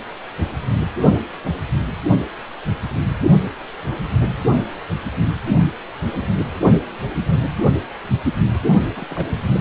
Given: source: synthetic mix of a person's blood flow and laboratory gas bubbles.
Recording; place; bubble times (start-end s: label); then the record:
Doppler ultrasound of blood flow; precordium
8.97-9.06 s: bubbles
9.10-9.29 s: bubbles
From the record:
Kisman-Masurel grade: 211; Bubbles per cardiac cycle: several, 3 to 8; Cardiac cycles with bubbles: 1 to 10%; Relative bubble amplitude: barely perceptible (0.100 to 0.250); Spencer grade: 1 (occasional bubble signal discernible with the cardiac motion signal, with majority of cardiac periods free of bubbles); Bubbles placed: only in the low amplitude regions of the cardiac cycle